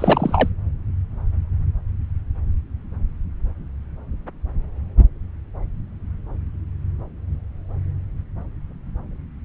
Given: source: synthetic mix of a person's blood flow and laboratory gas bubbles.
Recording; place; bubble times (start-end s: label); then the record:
Doppler ultrasound of blood flow; subclavian vein
0.00-0.49 s: bubbles
From the record:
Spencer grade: 1 (occasional bubble signal discernible with the cardiac motion signal, with majority of cardiac periods free of bubbles); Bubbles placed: anywhere in the cardiac cycle